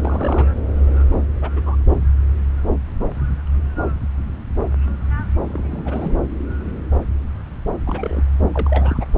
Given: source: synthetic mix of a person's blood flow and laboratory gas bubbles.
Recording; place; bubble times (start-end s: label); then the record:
Doppler ultrasound of blood flow; subclavian vein
0.02-0.48 s: bubbles
1.15-1.32 s: bubbles
1.41-1.50 s: bubbles
1.56-1.62 s: bubbles
1.65-1.76 s: bubbles
5.44-6.12 s: bubbles
7.86-8.23 s: bubbles
8.54-9.05 s: bubbles
From the record:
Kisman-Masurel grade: 221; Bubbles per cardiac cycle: several, 3 to 8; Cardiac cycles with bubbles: 10 to 50%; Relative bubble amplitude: barely perceptible (0.100 to 0.250); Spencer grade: 2 (many but less than half of the cardiac periods contain bubble signals, singularly or in groups); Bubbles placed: anywhere in the cardiac cycle